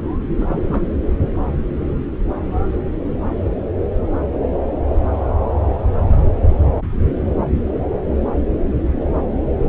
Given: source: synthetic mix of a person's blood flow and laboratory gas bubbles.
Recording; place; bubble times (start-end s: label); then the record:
Doppler ultrasound of blood flow; subclavian vein
0.33-0.97 s: bubbles
From the record:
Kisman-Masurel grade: 211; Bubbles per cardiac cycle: several, 3 to 8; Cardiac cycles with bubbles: 1 to 10%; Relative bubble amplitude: barely perceptible (0.100 to 0.250); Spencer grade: 1 (occasional bubble signal discernible with the cardiac motion signal, with majority of cardiac periods free of bubbles); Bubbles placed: anywhere in the cardiac cycle